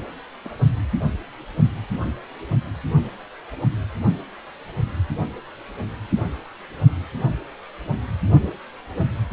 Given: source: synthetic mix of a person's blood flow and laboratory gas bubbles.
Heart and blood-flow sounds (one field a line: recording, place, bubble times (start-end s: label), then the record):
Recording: Doppler ultrasound of blood flow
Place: precordium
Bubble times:
0.44-0.50 s: bubbles
From the record:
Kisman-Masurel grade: 121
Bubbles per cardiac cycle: 1 to 2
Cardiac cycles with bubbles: 10 to 50%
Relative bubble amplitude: barely perceptible (0.100 to 0.250)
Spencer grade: 2 (many but less than half of the cardiac periods contain bubble signals, singularly or in groups)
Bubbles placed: only in the low amplitude regions of the cardiac cycle